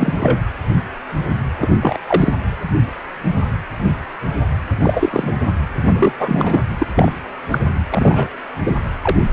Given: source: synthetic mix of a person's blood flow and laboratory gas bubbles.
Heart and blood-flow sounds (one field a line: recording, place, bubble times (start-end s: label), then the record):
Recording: Doppler ultrasound of blood flow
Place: precordium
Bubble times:
0.00-0.41 s: bubbles
1.60-1.78 s: bubbles
1.81-1.98 s: bubbles
2.06-2.35 s: bubbles
4.82-5.33 s: bubbles
5.88-6.12 s: bubbles
6.20-6.62 s: bubbles
6.78-6.87 s: bubbles
6.95-7.11 s: bubbles
7.50-7.58 s: bubbles
7.91-8.27 s: bubbles
8.64-8.78 s: bubbles
9.00-9.25 s: bubbles
From the record:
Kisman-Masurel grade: 233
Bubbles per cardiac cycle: several, 3 to 8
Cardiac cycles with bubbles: 50 to 99%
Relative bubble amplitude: loud (0.450 to 0.775)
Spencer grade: 3 (all of the cardiac periods contain showers or single bubble signals, but not dominating or overriding the cardiac motion signals)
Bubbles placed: anywhere in the cardiac cycle